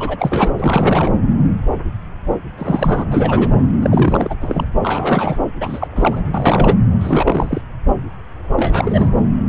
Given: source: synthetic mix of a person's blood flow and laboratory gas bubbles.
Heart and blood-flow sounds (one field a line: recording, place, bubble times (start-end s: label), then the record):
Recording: Doppler ultrasound of blood flow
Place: subclavian vein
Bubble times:
0.00-0.16 s: bubbles
0.19-0.51 s: bubbles
0.57-1.11 s: bubbles
2.57-3.06 s: bubbles
3.09-3.60 s: bubbles
3.82-4.35 s: bubbles
4.41-4.65 s: bubbles
4.83-5.39 s: bubbles
5.61-5.88 s: bubbles
5.96-6.22 s: bubbles
6.33-6.77 s: bubbles
7.00-7.61 s: bubbles
8.56-9.11 s: bubbles
From the record:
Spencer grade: 3 (all of the cardiac periods contain showers or single bubble signals, but not dominating or overriding the cardiac motion signals)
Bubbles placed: anywhere in the cardiac cycle